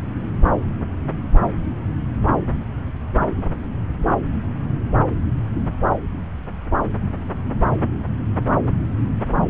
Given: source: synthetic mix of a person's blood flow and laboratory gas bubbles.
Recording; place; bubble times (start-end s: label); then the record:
Doppler ultrasound of blood flow; subclavian vein
no bubbles
From the record:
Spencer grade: 0 (complete lack of bubble signals)